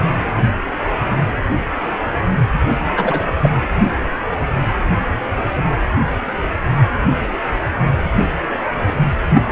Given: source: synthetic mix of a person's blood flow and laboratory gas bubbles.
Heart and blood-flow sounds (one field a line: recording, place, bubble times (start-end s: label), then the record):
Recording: Doppler ultrasound of blood flow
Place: precordium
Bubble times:
2.96-3.29 s: bubbles
3.42-3.50 s: bubbles
9.34-9.43 s: bubbles
From the record:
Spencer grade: 2 (many but less than half of the cardiac periods contain bubble signals, singularly or in groups)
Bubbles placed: anywhere in the cardiac cycle